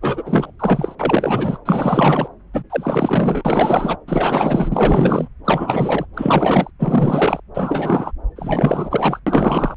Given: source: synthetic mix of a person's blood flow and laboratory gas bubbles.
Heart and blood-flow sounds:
Doppler ultrasound of blood flow; subclavian vein
0.01-0.52 s: bubbles
0.59-0.95 s: bubbles
0.99-1.58 s: bubbles
1.65-2.28 s: bubbles
2.54-2.64 s: bubbles
2.70-3.98 s: bubbles
4.07-5.28 s: bubbles
5.45-6.05 s: bubbles
6.13-6.71 s: bubbles
6.79-7.40 s: bubbles
7.54-8.12 s: bubbles
8.36-9.20 s: bubbles
9.27-9.75 s: bubbles
From the record:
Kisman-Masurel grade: 444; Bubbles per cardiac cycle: continuous sound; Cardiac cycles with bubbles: 100%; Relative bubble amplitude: maximal (0.775 to 0.999); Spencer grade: 4 (maximum detectable bubble signal sounding continuously throughout systole and diastole of every cardiac period, and overriding the amplitude of the normal cardiac signals); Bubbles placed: anywhere in the cardiac cycle

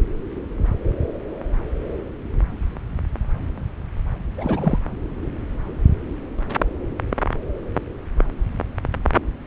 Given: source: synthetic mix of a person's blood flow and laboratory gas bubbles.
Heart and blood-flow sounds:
Doppler ultrasound of blood flow; subclavian vein
4.38-4.79 s: bubbles
From the record:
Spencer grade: 1 (occasional bubble signal discernible with the cardiac motion signal, with majority of cardiac periods free of bubbles); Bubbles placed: anywhere in the cardiac cycle

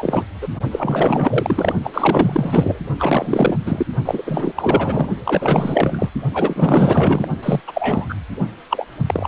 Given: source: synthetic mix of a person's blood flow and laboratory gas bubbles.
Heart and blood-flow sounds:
Doppler ultrasound of blood flow; precordium
0.00-0.26 s: bubbles
0.41-0.48 s: bubbles
0.71-1.73 s: bubbles
1.84-2.79 s: bubbles
2.99-3.57 s: bubbles
3.64-3.86 s: bubbles
4.05-4.22 s: bubbles
4.25-5.09 s: bubbles
5.25-6.10 s: bubbles
6.33-7.28 s: bubbles
7.42-7.60 s: bubbles
7.67-8.15 s: bubbles
8.70-8.86 s: bubbles
9.06-9.28 s: bubbles
From the record:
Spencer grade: 4 (maximum detectable bubble signal sounding continuously throughout systole and diastole of every cardiac period, and overriding the amplitude of the normal cardiac signals); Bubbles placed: only in the low amplitude regions of the cardiac cycle

